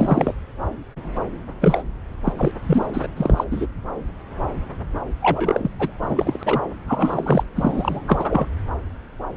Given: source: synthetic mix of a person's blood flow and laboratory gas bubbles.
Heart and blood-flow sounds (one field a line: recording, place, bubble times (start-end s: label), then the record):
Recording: Doppler ultrasound of blood flow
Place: subclavian vein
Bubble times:
0.00-0.34 s: bubbles
1.60-1.83 s: bubbles
2.25-2.33 s: bubbles
2.36-2.52 s: bubbles
2.65-2.88 s: bubbles
2.93-3.07 s: bubbles
3.17-3.44 s: bubbles
3.50-3.67 s: bubbles
5.21-5.71 s: bubbles
5.79-5.91 s: bubbles
6.01-6.61 s: bubbles
6.88-7.43 s: bubbles
7.55-8.02 s: bubbles
8.07-8.46 s: bubbles
From the record:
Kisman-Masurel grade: 333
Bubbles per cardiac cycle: rolling drumbeat, 9 or more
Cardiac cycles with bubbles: 50 to 99%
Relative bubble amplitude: loud (0.450 to 0.775)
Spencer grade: 3 (all of the cardiac periods contain showers or single bubble signals, but not dominating or overriding the cardiac motion signals)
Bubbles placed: anywhere in the cardiac cycle